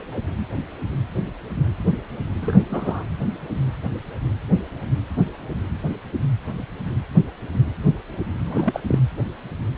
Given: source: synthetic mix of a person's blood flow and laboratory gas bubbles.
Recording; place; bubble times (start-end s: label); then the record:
Doppler ultrasound of blood flow; precordium
2.42-2.62 s: bubbles
2.68-3.04 s: bubbles
8.45-8.80 s: bubbles
8.87-8.99 s: bubbles
From the record:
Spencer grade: 2 (many but less than half of the cardiac periods contain bubble signals, singularly or in groups); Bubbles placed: anywhere in the cardiac cycle